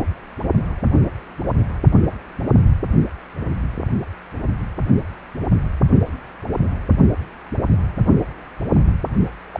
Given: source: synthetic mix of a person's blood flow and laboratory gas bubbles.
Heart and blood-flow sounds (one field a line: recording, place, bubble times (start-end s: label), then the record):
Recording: Doppler ultrasound of blood flow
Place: precordium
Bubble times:
9.54-9.60 s: bubbles
From the record:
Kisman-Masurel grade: 222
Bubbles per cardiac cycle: several, 3 to 8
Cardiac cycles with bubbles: 10 to 50%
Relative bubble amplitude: moderate (0.250 to 0.450)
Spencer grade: 2 (many but less than half of the cardiac periods contain bubble signals, singularly or in groups)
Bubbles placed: only in the low amplitude regions of the cardiac cycle